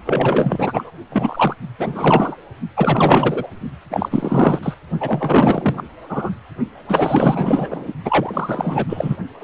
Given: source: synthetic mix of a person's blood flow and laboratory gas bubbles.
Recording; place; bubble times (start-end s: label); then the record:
Doppler ultrasound of blood flow; precordium
0.05-0.91 s: bubbles
1.09-1.56 s: bubbles
1.78-2.36 s: bubbles
2.77-3.47 s: bubbles
3.90-4.59 s: bubbles
4.62-4.74 s: bubbles
5.00-5.83 s: bubbles
6.09-6.30 s: bubbles
6.88-7.92 s: bubbles
8.04-9.16 s: bubbles
9.39-9.44 s: bubbles
From the record:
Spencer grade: 4 (maximum detectable bubble signal sounding continuously throughout systole and diastole of every cardiac period, and overriding the amplitude of the normal cardiac signals); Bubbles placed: only in the low amplitude regions of the cardiac cycle